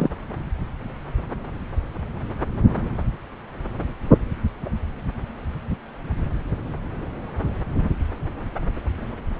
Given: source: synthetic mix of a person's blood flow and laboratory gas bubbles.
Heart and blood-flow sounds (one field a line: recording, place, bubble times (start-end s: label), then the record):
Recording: Doppler ultrasound of blood flow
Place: subclavian vein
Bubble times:
0.00-0.09 s: bubbles
From the record:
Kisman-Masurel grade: 113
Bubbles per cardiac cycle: 1 to 2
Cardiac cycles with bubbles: 1 to 10%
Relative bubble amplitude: loud (0.450 to 0.775)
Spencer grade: 1 (occasional bubble signal discernible with the cardiac motion signal, with majority of cardiac periods free of bubbles)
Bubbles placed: anywhere in the cardiac cycle